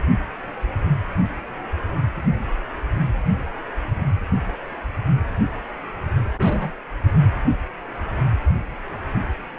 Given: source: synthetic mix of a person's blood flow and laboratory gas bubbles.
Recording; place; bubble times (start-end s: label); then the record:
Doppler ultrasound of blood flow; precordium
6.37-6.72 s: bubbles
From the record:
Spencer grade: 1 (occasional bubble signal discernible with the cardiac motion signal, with majority of cardiac periods free of bubbles); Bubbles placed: anywhere in the cardiac cycle